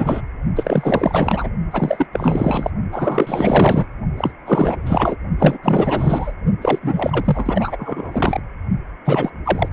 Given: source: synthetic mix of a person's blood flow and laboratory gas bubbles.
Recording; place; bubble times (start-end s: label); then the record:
Doppler ultrasound of blood flow; precordium
0.00-0.21 s: bubbles
0.55-1.50 s: bubbles
1.71-2.06 s: bubbles
2.12-2.71 s: bubbles
2.92-3.86 s: bubbles
4.17-4.33 s: bubbles
4.46-5.16 s: bubbles
5.38-5.58 s: bubbles
5.62-6.33 s: bubbles
6.61-6.79 s: bubbles
6.82-8.40 s: bubbles
9.05-9.31 s: bubbles
9.45-9.69 s: bubbles
From the record:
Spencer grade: 4 (maximum detectable bubble signal sounding continuously throughout systole and diastole of every cardiac period, and overriding the amplitude of the normal cardiac signals); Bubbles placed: only in the low amplitude regions of the cardiac cycle